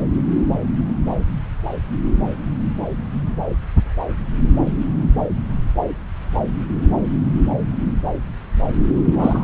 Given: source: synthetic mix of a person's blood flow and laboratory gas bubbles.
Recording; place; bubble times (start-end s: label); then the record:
Doppler ultrasound of blood flow; subclavian vein
9.04-9.43 s: bubbles
From the record:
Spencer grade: 1 (occasional bubble signal discernible with the cardiac motion signal, with majority of cardiac periods free of bubbles); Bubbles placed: anywhere in the cardiac cycle